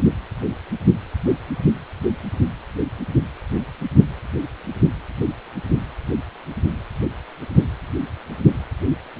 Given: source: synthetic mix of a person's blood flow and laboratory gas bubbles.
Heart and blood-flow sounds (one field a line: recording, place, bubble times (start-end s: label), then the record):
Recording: Doppler ultrasound of blood flow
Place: precordium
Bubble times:
no bubbles
From the record:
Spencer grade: 0 (complete lack of bubble signals)